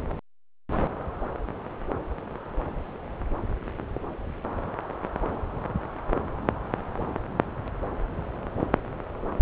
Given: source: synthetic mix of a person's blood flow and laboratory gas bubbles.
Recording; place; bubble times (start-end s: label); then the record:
Doppler ultrasound of blood flow; subclavian vein
no bubbles
From the record:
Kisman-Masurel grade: 000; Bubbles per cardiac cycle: 0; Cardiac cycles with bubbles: 0%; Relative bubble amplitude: no bubbles discernible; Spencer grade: 0 (complete lack of bubble signals)